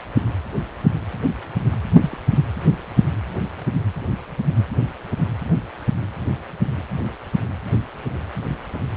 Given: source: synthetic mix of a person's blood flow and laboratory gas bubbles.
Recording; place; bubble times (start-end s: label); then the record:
Doppler ultrasound of blood flow; precordium
1.91-2.21 s: bubbles
From the record:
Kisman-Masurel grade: 123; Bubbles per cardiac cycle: 1 to 2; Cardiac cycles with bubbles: 10 to 50%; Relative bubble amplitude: loud (0.450 to 0.775); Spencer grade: 2 (many but less than half of the cardiac periods contain bubble signals, singularly or in groups); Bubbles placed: anywhere in the cardiac cycle